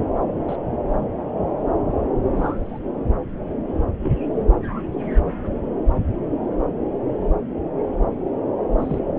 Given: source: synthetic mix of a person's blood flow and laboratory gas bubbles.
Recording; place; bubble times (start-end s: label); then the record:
Doppler ultrasound of blood flow; subclavian vein
0.48-0.56 s: bubbles
2.36-2.61 s: bubbles
2.65-2.78 s: bubbles
4.04-4.10 s: bubbles
8.79-8.99 s: bubbles
From the record:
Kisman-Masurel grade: 121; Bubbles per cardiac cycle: 1 to 2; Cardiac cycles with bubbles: 10 to 50%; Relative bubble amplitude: barely perceptible (0.100 to 0.250); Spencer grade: 2 (many but less than half of the cardiac periods contain bubble signals, singularly or in groups); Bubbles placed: anywhere in the cardiac cycle